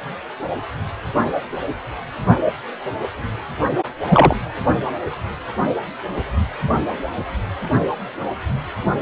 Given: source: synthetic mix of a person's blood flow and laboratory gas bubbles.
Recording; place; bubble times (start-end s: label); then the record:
Doppler ultrasound of blood flow; precordium
4.10-4.35 s: bubbles
From the record:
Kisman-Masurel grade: 123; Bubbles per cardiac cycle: 1 to 2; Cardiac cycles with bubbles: 10 to 50%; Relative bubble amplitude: loud (0.450 to 0.775); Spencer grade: 2 (many but less than half of the cardiac periods contain bubble signals, singularly or in groups); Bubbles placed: only in the low amplitude regions of the cardiac cycle